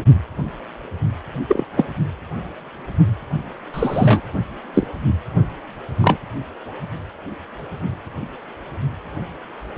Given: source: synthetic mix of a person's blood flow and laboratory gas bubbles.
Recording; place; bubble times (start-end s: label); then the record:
Doppler ultrasound of blood flow; precordium
1.47-1.65 s: bubbles
1.76-1.88 s: bubbles
3.74-4.21 s: bubbles
4.74-4.87 s: bubbles
6.01-6.18 s: bubbles
From the record:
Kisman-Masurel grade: 123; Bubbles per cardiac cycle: 1 to 2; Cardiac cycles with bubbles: 10 to 50%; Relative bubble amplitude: loud (0.450 to 0.775); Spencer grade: 2 (many but less than half of the cardiac periods contain bubble signals, singularly or in groups); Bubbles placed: anywhere in the cardiac cycle